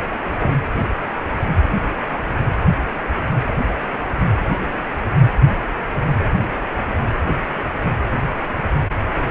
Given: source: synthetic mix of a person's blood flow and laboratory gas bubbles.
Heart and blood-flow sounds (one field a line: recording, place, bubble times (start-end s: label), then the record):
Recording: Doppler ultrasound of blood flow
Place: precordium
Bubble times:
0.40-0.52 s: bubbles
From the record:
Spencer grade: 2 (many but less than half of the cardiac periods contain bubble signals, singularly or in groups)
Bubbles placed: anywhere in the cardiac cycle